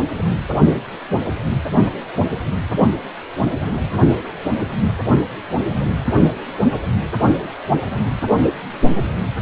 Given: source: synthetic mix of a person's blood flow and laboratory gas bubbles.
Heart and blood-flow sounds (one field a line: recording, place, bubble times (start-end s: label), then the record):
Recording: Doppler ultrasound of blood flow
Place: precordium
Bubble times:
no bubbles
From the record:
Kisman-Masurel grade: 000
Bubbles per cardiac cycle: 0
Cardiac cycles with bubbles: 0%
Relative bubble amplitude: no bubbles discernible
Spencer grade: 0 (complete lack of bubble signals)